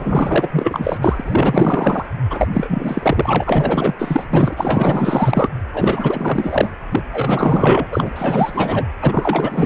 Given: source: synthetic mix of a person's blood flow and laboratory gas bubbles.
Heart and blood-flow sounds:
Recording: Doppler ultrasound of blood flow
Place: precordium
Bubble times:
0.00-2.06 s: bubbles
2.30-2.48 s: bubbles
2.53-3.94 s: bubbles
3.98-4.26 s: bubbles
4.30-4.53 s: bubbles
4.56-5.48 s: bubbles
5.72-6.73 s: bubbles
6.91-7.02 s: bubbles
7.12-7.88 s: bubbles
7.91-8.86 s: bubbles
9.00-9.66 s: bubbles
From the record:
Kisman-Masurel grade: 444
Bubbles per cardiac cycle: continuous sound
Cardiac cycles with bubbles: 100%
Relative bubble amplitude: maximal (0.775 to 0.999)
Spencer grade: 4 (maximum detectable bubble signal sounding continuously throughout systole and diastole of every cardiac period, and overriding the amplitude of the normal cardiac signals)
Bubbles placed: anywhere in the cardiac cycle

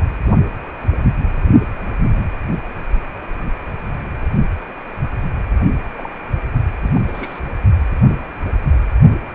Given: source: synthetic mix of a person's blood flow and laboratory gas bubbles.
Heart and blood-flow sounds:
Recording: Doppler ultrasound of blood flow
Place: precordium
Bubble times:
5.97-6.10 s: bubbles
6.82-6.92 s: bubbles
6.95-7.01 s: bubbles
7.05-7.40 s: bubbles
From the record:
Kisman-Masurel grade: 211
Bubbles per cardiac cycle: several, 3 to 8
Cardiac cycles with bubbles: 1 to 10%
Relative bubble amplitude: barely perceptible (0.100 to 0.250)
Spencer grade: 1 (occasional bubble signal discernible with the cardiac motion signal, with majority of cardiac periods free of bubbles)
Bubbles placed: only in the low amplitude regions of the cardiac cycle

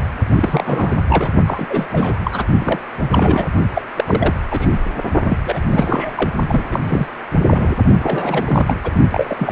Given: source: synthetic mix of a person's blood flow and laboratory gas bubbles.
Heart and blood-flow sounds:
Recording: Doppler ultrasound of blood flow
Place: precordium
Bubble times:
0.35-0.95 s: bubbles
1.09-1.31 s: bubbles
1.46-1.65 s: bubbles
1.69-1.87 s: bubbles
1.92-2.19 s: bubbles
2.24-2.44 s: bubbles
2.58-2.79 s: bubbles
3.11-3.46 s: bubbles
3.73-3.82 s: bubbles
3.97-4.34 s: bubbles
4.51-4.69 s: bubbles
4.72-4.78 s: bubbles
5.21-5.38 s: bubbles
5.45-5.60 s: bubbles
5.71-6.29 s: bubbles
6.48-6.65 s: bubbles
6.71-7.08 s: bubbles
7.48-7.74 s: bubbles
7.99-8.76 s: bubbles
8.84-8.94 s: bubbles
9.11-9.52 s: bubbles
From the record:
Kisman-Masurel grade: 342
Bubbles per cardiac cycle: rolling drumbeat, 9 or more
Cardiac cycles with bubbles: 100%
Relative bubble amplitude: moderate (0.250 to 0.450)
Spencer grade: 3 (all of the cardiac periods contain showers or single bubble signals, but not dominating or overriding the cardiac motion signals)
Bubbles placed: only in the low amplitude regions of the cardiac cycle

